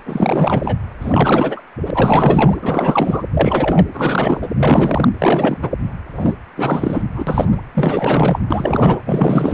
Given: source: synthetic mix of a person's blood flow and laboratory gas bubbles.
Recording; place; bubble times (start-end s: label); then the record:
Doppler ultrasound of blood flow; precordium
0.05-0.76 s: bubbles
1.00-1.60 s: bubbles
1.86-1.91 s: bubbles
1.94-2.58 s: bubbles
2.62-3.23 s: bubbles
3.31-3.87 s: bubbles
3.93-4.54 s: bubbles
4.56-5.08 s: bubbles
5.19-5.58 s: bubbles
5.62-5.70 s: bubbles
6.17-6.33 s: bubbles
6.56-7.03 s: bubbles
7.15-7.58 s: bubbles
7.74-8.39 s: bubbles
8.51-9.02 s: bubbles
9.06-9.54 s: bubbles
From the record:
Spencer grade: 4 (maximum detectable bubble signal sounding continuously throughout systole and diastole of every cardiac period, and overriding the amplitude of the normal cardiac signals); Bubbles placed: anywhere in the cardiac cycle